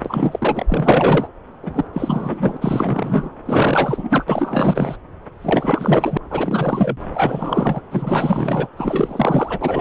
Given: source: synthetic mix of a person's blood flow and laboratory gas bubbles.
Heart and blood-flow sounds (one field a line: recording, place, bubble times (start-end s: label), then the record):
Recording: Doppler ultrasound of blood flow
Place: subclavian vein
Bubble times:
0.05-0.66 s: bubbles
0.70-1.29 s: bubbles
1.62-1.84 s: bubbles
1.93-2.57 s: bubbles
2.60-3.29 s: bubbles
3.44-4.25 s: bubbles
4.28-4.97 s: bubbles
5.42-6.18 s: bubbles
6.30-6.97 s: bubbles
7.14-7.82 s: bubbles
7.91-8.68 s: bubbles
8.77-9.81 s: bubbles
From the record:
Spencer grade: 4 (maximum detectable bubble signal sounding continuously throughout systole and diastole of every cardiac period, and overriding the amplitude of the normal cardiac signals)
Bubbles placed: anywhere in the cardiac cycle